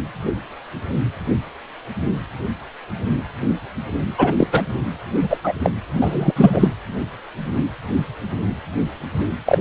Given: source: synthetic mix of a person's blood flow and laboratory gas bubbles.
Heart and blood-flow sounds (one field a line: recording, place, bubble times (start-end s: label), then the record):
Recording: Doppler ultrasound of blood flow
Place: precordium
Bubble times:
4.17-4.33 s: bubbles
4.38-4.63 s: bubbles
5.13-5.27 s: bubbles
5.29-5.38 s: bubbles
5.44-5.53 s: bubbles
5.62-5.71 s: bubbles
5.94-6.32 s: bubbles
6.36-6.68 s: bubbles
9.45-9.58 s: bubbles
From the record:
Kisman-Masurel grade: 223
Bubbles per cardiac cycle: several, 3 to 8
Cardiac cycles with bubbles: 10 to 50%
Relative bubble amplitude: loud (0.450 to 0.775)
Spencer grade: 2 (many but less than half of the cardiac periods contain bubble signals, singularly or in groups)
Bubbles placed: anywhere in the cardiac cycle